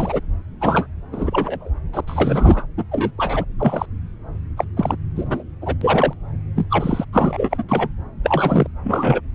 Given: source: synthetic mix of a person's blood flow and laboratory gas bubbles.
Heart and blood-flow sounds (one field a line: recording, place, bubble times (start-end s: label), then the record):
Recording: Doppler ultrasound of blood flow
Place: subclavian vein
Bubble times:
0.00-0.20 s: bubbles
0.60-0.87 s: bubbles
1.12-1.71 s: bubbles
1.93-2.01 s: bubbles
2.07-2.67 s: bubbles
2.77-2.83 s: bubbles
2.91-3.12 s: bubbles
3.18-3.45 s: bubbles
3.58-3.85 s: bubbles
4.56-4.64 s: bubbles
4.76-4.96 s: bubbles
5.15-5.43 s: bubbles
5.61-5.75 s: bubbles
5.81-6.13 s: bubbles
6.56-6.67 s: bubbles
6.69-7.05 s: bubbles
7.12-7.63 s: bubbles
7.68-7.88 s: bubbles
8.24-8.67 s: bubbles
8.84-9.21 s: bubbles
From the record:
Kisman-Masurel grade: 243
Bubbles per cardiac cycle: several, 3 to 8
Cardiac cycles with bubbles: 100%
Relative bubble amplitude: loud (0.450 to 0.775)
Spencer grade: 3 (all of the cardiac periods contain showers or single bubble signals, but not dominating or overriding the cardiac motion signals)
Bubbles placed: anywhere in the cardiac cycle